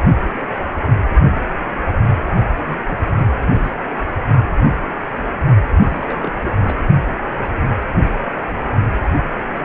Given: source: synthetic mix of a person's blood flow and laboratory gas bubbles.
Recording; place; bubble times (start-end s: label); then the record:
Doppler ultrasound of blood flow; precordium
2.60-2.77 s: bubbles
2.88-2.97 s: bubbles
3.05-3.14 s: bubbles
3.17-3.24 s: bubbles
3.30-3.71 s: bubbles
5.80-6.39 s: bubbles
6.44-6.50 s: bubbles
6.63-6.75 s: bubbles
From the record:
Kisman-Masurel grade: 221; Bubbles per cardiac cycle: several, 3 to 8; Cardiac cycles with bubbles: 10 to 50%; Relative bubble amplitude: barely perceptible (0.100 to 0.250); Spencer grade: 2 (many but less than half of the cardiac periods contain bubble signals, singularly or in groups); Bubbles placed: only in the low amplitude regions of the cardiac cycle